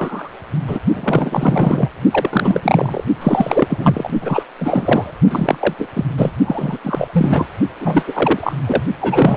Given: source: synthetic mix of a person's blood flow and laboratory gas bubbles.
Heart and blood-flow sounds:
Doppler ultrasound of blood flow; precordium
0.00-0.30 s: bubbles
0.68-0.79 s: bubbles
0.93-1.89 s: bubbles
2.11-3.04 s: bubbles
3.19-4.10 s: bubbles
4.21-4.43 s: bubbles
4.57-5.12 s: bubbles
5.29-5.58 s: bubbles
5.61-5.74 s: bubbles
5.79-5.88 s: bubbles
5.93-6.04 s: bubbles
6.17-6.33 s: bubbles
6.45-6.79 s: bubbles
6.83-7.08 s: bubbles
7.13-7.49 s: bubbles
7.80-8.53 s: bubbles
8.66-8.83 s: bubbles
9.01-9.37 s: bubbles
From the record:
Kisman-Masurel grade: 333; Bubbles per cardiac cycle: rolling drumbeat, 9 or more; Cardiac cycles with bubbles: 50 to 99%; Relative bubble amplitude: loud (0.450 to 0.775); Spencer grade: 3 (all of the cardiac periods contain showers or single bubble signals, but not dominating or overriding the cardiac motion signals); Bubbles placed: only in the low amplitude regions of the cardiac cycle

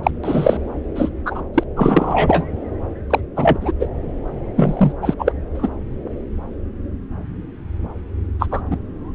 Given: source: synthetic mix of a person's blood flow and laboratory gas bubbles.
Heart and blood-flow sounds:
Doppler ultrasound of blood flow; subclavian vein
0.03-0.11 s: bubbles
0.24-0.57 s: bubbles
0.96-1.09 s: bubbles
1.25-1.42 s: bubbles
1.54-1.64 s: bubbles
1.76-2.45 s: bubbles
3.10-3.20 s: bubbles
3.36-3.72 s: bubbles
3.80-3.88 s: bubbles
4.56-4.92 s: bubbles
5.02-5.14 s: bubbles
5.19-5.32 s: bubbles
5.54-5.69 s: bubbles
8.39-8.46 s: bubbles
8.51-8.61 s: bubbles
8.71-8.77 s: bubbles
From the record:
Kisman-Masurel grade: 233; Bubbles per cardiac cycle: several, 3 to 8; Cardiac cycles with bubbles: 50 to 99%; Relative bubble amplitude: loud (0.450 to 0.775); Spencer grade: 3 (all of the cardiac periods contain showers or single bubble signals, but not dominating or overriding the cardiac motion signals); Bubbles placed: anywhere in the cardiac cycle

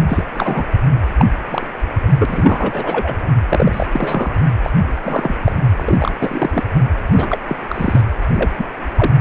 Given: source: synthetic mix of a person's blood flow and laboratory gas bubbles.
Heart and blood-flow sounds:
Doppler ultrasound of blood flow; precordium
0.00-0.03 s: bubbles
0.06-0.24 s: bubbles
0.34-0.66 s: bubbles
1.18-1.25 s: bubbles
1.50-1.67 s: bubbles
2.19-3.16 s: bubbles
3.49-3.87 s: bubbles
3.92-4.39 s: bubbles
4.63-4.70 s: bubbles
5.03-5.35 s: bubbles
5.42-5.55 s: bubbles
5.76-6.12 s: bubbles
6.20-6.63 s: bubbles
7.12-7.38 s: bubbles
7.46-7.56 s: bubbles
7.70-8.01 s: bubbles
8.33-8.49 s: bubbles
8.57-8.65 s: bubbles
8.96-9.12 s: bubbles
From the record:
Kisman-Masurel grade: 242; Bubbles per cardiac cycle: several, 3 to 8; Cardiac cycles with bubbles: 100%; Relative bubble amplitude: moderate (0.250 to 0.450); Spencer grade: 3 (all of the cardiac periods contain showers or single bubble signals, but not dominating or overriding the cardiac motion signals); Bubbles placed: anywhere in the cardiac cycle

